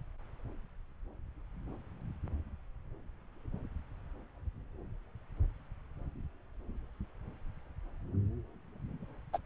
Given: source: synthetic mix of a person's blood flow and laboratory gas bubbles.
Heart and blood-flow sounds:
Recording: Doppler ultrasound of blood flow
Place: subclavian vein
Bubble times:
9.33-9.38 s: bubbles
From the record:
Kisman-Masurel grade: 112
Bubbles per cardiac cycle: 1 to 2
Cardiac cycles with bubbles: 1 to 10%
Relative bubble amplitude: moderate (0.250 to 0.450)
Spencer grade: 1 (occasional bubble signal discernible with the cardiac motion signal, with majority of cardiac periods free of bubbles)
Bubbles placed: anywhere in the cardiac cycle

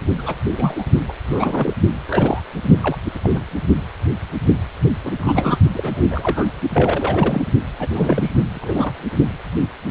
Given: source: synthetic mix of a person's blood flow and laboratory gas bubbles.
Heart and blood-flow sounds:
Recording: Doppler ultrasound of blood flow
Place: precordium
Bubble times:
0.18-0.40 s: bubbles
0.50-0.84 s: bubbles
1.08-1.13 s: bubbles
1.26-1.73 s: bubbles
2.08-2.41 s: bubbles
2.82-2.98 s: bubbles
3.15-3.19 s: bubbles
3.23-3.30 s: bubbles
3.34-3.44 s: bubbles
5.04-5.12 s: bubbles
5.21-5.58 s: bubbles
5.75-6.46 s: bubbles
6.73-7.47 s: bubbles
7.79-8.32 s: bubbles
8.54-8.94 s: bubbles
From the record:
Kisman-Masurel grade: 242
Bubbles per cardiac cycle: several, 3 to 8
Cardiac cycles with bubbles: 100%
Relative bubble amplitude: moderate (0.250 to 0.450)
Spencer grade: 3 (all of the cardiac periods contain showers or single bubble signals, but not dominating or overriding the cardiac motion signals)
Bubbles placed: only in the low amplitude regions of the cardiac cycle

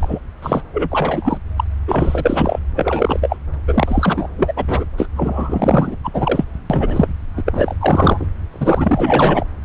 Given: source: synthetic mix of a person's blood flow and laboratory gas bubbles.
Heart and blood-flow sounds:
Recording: Doppler ultrasound of blood flow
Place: subclavian vein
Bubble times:
0.00-0.19 s: bubbles
0.42-0.63 s: bubbles
0.72-1.38 s: bubbles
1.56-1.64 s: bubbles
1.87-2.59 s: bubbles
2.74-3.36 s: bubbles
3.53-3.57 s: bubbles
3.67-4.27 s: bubbles
4.38-4.84 s: bubbles
4.97-5.08 s: bubbles
5.16-5.96 s: bubbles
6.04-6.10 s: bubbles
6.13-6.45 s: bubbles
6.70-7.08 s: bubbles
7.36-7.42 s: bubbles
7.46-7.75 s: bubbles
7.80-8.27 s: bubbles
8.50-9.45 s: bubbles
From the record:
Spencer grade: 4 (maximum detectable bubble signal sounding continuously throughout systole and diastole of every cardiac period, and overriding the amplitude of the normal cardiac signals)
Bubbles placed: anywhere in the cardiac cycle

